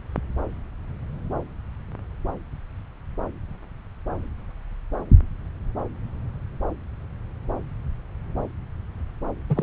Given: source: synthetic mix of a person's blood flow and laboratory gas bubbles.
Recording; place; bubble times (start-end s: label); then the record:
Doppler ultrasound of blood flow; subclavian vein
9.50-9.63 s: bubbles
From the record:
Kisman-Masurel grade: 212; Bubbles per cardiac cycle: several, 3 to 8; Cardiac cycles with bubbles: 1 to 10%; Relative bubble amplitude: moderate (0.250 to 0.450); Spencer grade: 1 (occasional bubble signal discernible with the cardiac motion signal, with majority of cardiac periods free of bubbles); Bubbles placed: anywhere in the cardiac cycle